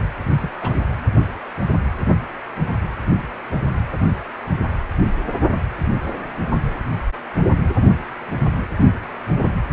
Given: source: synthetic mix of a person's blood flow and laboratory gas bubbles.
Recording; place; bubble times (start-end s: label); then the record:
Doppler ultrasound of blood flow; precordium
0.41-0.74 s: bubbles
From the record:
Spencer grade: 1 (occasional bubble signal discernible with the cardiac motion signal, with majority of cardiac periods free of bubbles); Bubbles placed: only in the low amplitude regions of the cardiac cycle